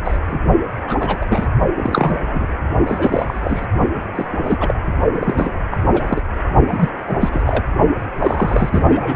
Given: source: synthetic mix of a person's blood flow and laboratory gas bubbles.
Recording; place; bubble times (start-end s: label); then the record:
Doppler ultrasound of blood flow; precordium
0.04-0.18 s: bubbles
0.28-0.41 s: bubbles
0.87-1.17 s: bubbles
1.22-1.26 s: bubbles
1.28-1.47 s: bubbles
1.78-2.21 s: bubbles
2.26-2.46 s: bubbles
2.87-3.67 s: bubbles
4.15-4.25 s: bubbles
4.43-4.56 s: bubbles
4.60-4.74 s: bubbles
5.13-5.52 s: bubbles
5.71-5.77 s: bubbles
5.93-6.21 s: bubbles
6.67-6.89 s: bubbles
7.06-7.17 s: bubbles
7.20-7.42 s: bubbles
7.45-7.63 s: bubbles
8.19-9.16 s: bubbles
From the record:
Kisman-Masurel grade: 232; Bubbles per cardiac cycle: several, 3 to 8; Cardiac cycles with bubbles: 50 to 99%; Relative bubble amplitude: moderate (0.250 to 0.450); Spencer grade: 3 (all of the cardiac periods contain showers or single bubble signals, but not dominating or overriding the cardiac motion signals); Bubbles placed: only in the low amplitude regions of the cardiac cycle